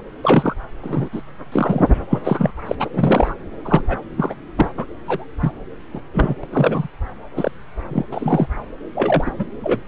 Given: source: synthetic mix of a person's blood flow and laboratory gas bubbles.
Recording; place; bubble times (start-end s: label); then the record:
Doppler ultrasound of blood flow; subclavian vein
0.23-0.54 s: bubbles
0.83-1.09 s: bubbles
1.12-1.22 s: bubbles
1.51-1.93 s: bubbles
2.10-2.19 s: bubbles
2.24-2.52 s: bubbles
2.66-2.76 s: bubbles
2.80-2.89 s: bubbles
2.93-3.34 s: bubbles
3.65-3.81 s: bubbles
3.88-3.98 s: bubbles
4.17-4.35 s: bubbles
4.58-4.71 s: bubbles
4.77-4.85 s: bubbles
5.06-5.25 s: bubbles
5.39-5.52 s: bubbles
5.93-6.00 s: bubbles
6.13-6.35 s: bubbles
6.43-6.47 s: bubbles
6.52-6.88 s: bubbles
7.35-7.51 s: bubbles
7.90-8.05 s: bubbles
8.12-8.48 s: bubbles
8.95-9.31 s: bubbles
9.38-9.46 s: bubbles
9.63-9.83 s: bubbles
From the record:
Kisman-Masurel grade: 243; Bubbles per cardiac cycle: several, 3 to 8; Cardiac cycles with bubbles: 100%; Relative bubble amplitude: loud (0.450 to 0.775); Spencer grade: 3 (all of the cardiac periods contain showers or single bubble signals, but not dominating or overriding the cardiac motion signals); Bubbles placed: anywhere in the cardiac cycle